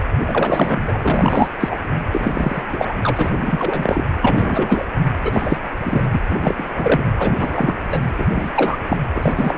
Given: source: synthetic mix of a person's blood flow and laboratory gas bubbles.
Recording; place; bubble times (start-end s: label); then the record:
Doppler ultrasound of blood flow; precordium
0.25-0.98 s: bubbles
1.02-1.48 s: bubbles
1.60-1.77 s: bubbles
2.12-2.63 s: bubbles
2.71-2.93 s: bubbles
3.01-3.30 s: bubbles
3.37-4.04 s: bubbles
4.21-4.85 s: bubbles
5.24-5.58 s: bubbles
5.83-6.04 s: bubbles
6.10-6.20 s: bubbles
6.30-6.35 s: bubbles
6.42-6.54 s: bubbles
6.58-7.01 s: bubbles
7.15-7.77 s: bubbles
7.90-7.98 s: bubbles
8.02-8.08 s: bubbles
8.18-8.25 s: bubbles
8.29-8.50 s: bubbles
8.55-8.78 s: bubbles
8.88-8.97 s: bubbles
9.14-9.33 s: bubbles
9.36-9.58 s: bubbles
From the record:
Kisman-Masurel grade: 343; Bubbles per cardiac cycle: rolling drumbeat, 9 or more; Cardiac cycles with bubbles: 100%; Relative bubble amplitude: loud (0.450 to 0.775); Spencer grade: 3 (all of the cardiac periods contain showers or single bubble signals, but not dominating or overriding the cardiac motion signals); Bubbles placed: anywhere in the cardiac cycle